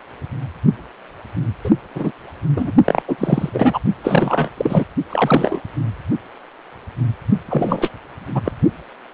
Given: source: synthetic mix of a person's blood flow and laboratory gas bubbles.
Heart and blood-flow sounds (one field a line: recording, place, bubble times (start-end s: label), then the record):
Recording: Doppler ultrasound of blood flow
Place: precordium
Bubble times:
1.64-1.71 s: bubbles
1.94-2.12 s: bubbles
2.56-2.71 s: bubbles
2.85-3.02 s: bubbles
3.08-3.50 s: bubbles
3.53-3.79 s: bubbles
4.04-4.50 s: bubbles
4.57-4.84 s: bubbles
5.09-5.61 s: bubbles
7.49-7.89 s: bubbles
8.34-8.41 s: bubbles
8.44-8.52 s: bubbles
From the record:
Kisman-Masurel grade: 233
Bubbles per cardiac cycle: several, 3 to 8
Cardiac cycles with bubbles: 50 to 99%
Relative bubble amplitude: loud (0.450 to 0.775)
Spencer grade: 3 (all of the cardiac periods contain showers or single bubble signals, but not dominating or overriding the cardiac motion signals)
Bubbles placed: only in the low amplitude regions of the cardiac cycle